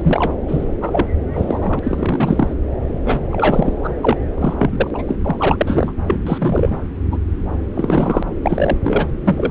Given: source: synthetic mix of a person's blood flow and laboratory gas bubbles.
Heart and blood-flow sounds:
Doppler ultrasound of blood flow; subclavian vein
0.00-0.35 s: bubbles
0.48-0.66 s: bubbles
0.81-1.05 s: bubbles
1.33-1.79 s: bubbles
1.82-2.53 s: bubbles
3.04-3.20 s: bubbles
3.31-3.73 s: bubbles
3.84-3.88 s: bubbles
4.03-4.17 s: bubbles
4.38-4.54 s: bubbles
4.58-4.91 s: bubbles
4.95-5.04 s: bubbles
5.08-5.17 s: bubbles
5.24-5.93 s: bubbles
6.07-6.20 s: bubbles
6.22-6.86 s: bubbles
7.12-7.18 s: bubbles
7.74-8.23 s: bubbles
8.42-8.78 s: bubbles
8.83-9.06 s: bubbles
9.24-9.51 s: bubbles
From the record:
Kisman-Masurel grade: 342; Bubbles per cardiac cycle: rolling drumbeat, 9 or more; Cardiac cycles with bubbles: 100%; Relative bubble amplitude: moderate (0.250 to 0.450); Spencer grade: 3 (all of the cardiac periods contain showers or single bubble signals, but not dominating or overriding the cardiac motion signals); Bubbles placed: anywhere in the cardiac cycle

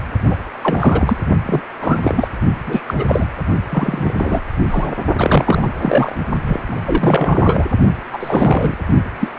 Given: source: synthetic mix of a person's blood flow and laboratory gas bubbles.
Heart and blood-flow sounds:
Doppler ultrasound of blood flow; precordium
0.28-0.36 s: bubbles
0.62-1.17 s: bubbles
1.46-1.61 s: bubbles
1.80-2.28 s: bubbles
2.66-2.82 s: bubbles
2.87-2.94 s: bubbles
2.98-3.26 s: bubbles
3.69-4.40 s: bubbles
4.71-5.04 s: bubbles
5.18-5.70 s: bubbles
5.81-6.15 s: bubbles
6.46-6.60 s: bubbles
6.68-7.65 s: bubbles
8.12-8.74 s: bubbles
9.19-9.29 s: bubbles
From the record:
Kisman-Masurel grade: 343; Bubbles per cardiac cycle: rolling drumbeat, 9 or more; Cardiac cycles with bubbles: 100%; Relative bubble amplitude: loud (0.450 to 0.775); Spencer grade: 3 (all of the cardiac periods contain showers or single bubble signals, but not dominating or overriding the cardiac motion signals); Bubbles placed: only in the low amplitude regions of the cardiac cycle

